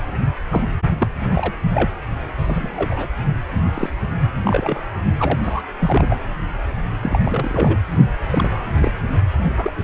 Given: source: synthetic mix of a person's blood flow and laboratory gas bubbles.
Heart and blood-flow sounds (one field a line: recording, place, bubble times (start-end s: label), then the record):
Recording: Doppler ultrasound of blood flow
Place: precordium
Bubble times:
0.49-0.64 s: bubbles
1.00-1.08 s: bubbles
1.22-1.27 s: bubbles
1.31-1.53 s: bubbles
1.74-1.91 s: bubbles
2.38-2.70 s: bubbles
2.76-3.09 s: bubbles
3.74-3.90 s: bubbles
4.45-4.83 s: bubbles
5.19-5.39 s: bubbles
5.42-5.62 s: bubbles
5.79-6.17 s: bubbles
7.01-7.78 s: bubbles
8.30-8.50 s: bubbles
8.80-8.91 s: bubbles
9.57-9.71 s: bubbles
From the record:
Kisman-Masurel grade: 242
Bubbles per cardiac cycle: several, 3 to 8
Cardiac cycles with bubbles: 100%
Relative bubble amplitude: moderate (0.250 to 0.450)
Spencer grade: 3 (all of the cardiac periods contain showers or single bubble signals, but not dominating or overriding the cardiac motion signals)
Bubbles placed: only in the low amplitude regions of the cardiac cycle